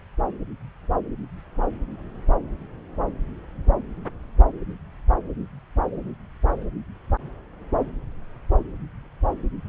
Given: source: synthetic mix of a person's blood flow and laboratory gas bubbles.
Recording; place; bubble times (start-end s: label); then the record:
Doppler ultrasound of blood flow; subclavian vein
no bubbles
From the record:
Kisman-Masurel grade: 000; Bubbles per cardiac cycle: 0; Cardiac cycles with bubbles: 0%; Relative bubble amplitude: no bubbles discernible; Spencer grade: 0 (complete lack of bubble signals)